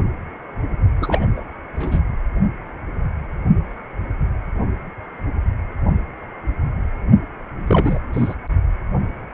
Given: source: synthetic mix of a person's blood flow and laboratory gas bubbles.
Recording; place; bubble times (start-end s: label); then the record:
Doppler ultrasound of blood flow; precordium
1.01-1.25 s: bubbles
1.36-1.42 s: bubbles
1.75-2.00 s: bubbles
7.67-7.99 s: bubbles
8.12-8.34 s: bubbles
From the record:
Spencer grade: 2 (many but less than half of the cardiac periods contain bubble signals, singularly or in groups); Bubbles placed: only in the low amplitude regions of the cardiac cycle